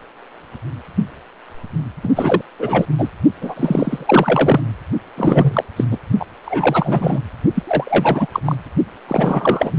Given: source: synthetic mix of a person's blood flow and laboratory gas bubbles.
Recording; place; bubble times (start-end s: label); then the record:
Doppler ultrasound of blood flow; precordium
2.03-2.09 s: bubbles
2.16-2.42 s: bubbles
2.59-2.85 s: bubbles
2.98-3.08 s: bubbles
3.42-4.61 s: bubbles
5.17-5.64 s: bubbles
5.76-5.84 s: bubbles
5.91-5.99 s: bubbles
6.20-6.25 s: bubbles
6.45-7.21 s: bubbles
7.55-7.62 s: bubbles
7.67-8.27 s: bubbles
8.32-8.40 s: bubbles
8.45-8.55 s: bubbles
9.07-9.73 s: bubbles
From the record:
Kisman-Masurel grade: 333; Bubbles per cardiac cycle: rolling drumbeat, 9 or more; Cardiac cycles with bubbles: 50 to 99%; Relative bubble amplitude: loud (0.450 to 0.775); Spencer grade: 3 (all of the cardiac periods contain showers or single bubble signals, but not dominating or overriding the cardiac motion signals); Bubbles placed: only in the low amplitude regions of the cardiac cycle